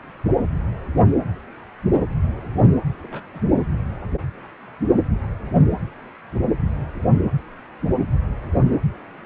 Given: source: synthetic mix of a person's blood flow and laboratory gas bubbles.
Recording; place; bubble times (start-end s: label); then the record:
Doppler ultrasound of blood flow; precordium
2.99-3.22 s: bubbles
3.33-3.41 s: bubbles
3.58-3.64 s: bubbles
From the record:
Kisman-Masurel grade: 221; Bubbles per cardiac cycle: several, 3 to 8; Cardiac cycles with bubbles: 10 to 50%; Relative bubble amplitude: barely perceptible (0.100 to 0.250); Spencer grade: 2 (many but less than half of the cardiac periods contain bubble signals, singularly or in groups); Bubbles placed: anywhere in the cardiac cycle